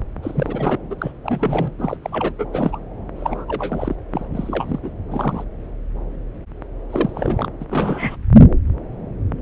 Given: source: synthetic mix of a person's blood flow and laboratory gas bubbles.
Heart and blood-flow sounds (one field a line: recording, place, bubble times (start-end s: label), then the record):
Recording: Doppler ultrasound of blood flow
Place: subclavian vein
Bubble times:
0.22-0.77 s: bubbles
0.90-0.95 s: bubbles
0.98-1.11 s: bubbles
1.23-1.72 s: bubbles
1.78-1.97 s: bubbles
2.02-2.33 s: bubbles
2.38-2.46 s: bubbles
2.53-2.79 s: bubbles
3.16-3.45 s: bubbles
3.48-3.96 s: bubbles
4.11-4.25 s: bubbles
4.33-4.79 s: bubbles
4.82-4.90 s: bubbles
5.11-5.43 s: bubbles
6.89-7.48 s: bubbles
7.60-7.65 s: bubbles
7.70-8.16 s: bubbles
From the record:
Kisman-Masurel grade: 332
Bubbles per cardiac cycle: rolling drumbeat, 9 or more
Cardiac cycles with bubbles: 50 to 99%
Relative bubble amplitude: moderate (0.250 to 0.450)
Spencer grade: 3 (all of the cardiac periods contain showers or single bubble signals, but not dominating or overriding the cardiac motion signals)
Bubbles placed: anywhere in the cardiac cycle